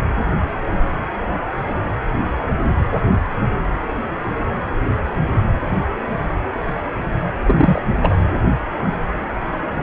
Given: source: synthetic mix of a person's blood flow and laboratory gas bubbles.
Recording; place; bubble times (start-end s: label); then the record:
Doppler ultrasound of blood flow; precordium
7.48-7.82 s: bubbles
8.02-8.18 s: bubbles
From the record:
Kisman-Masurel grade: 212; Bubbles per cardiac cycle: several, 3 to 8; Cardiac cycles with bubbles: 1 to 10%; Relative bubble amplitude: moderate (0.250 to 0.450); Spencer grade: 1 (occasional bubble signal discernible with the cardiac motion signal, with majority of cardiac periods free of bubbles); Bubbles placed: anywhere in the cardiac cycle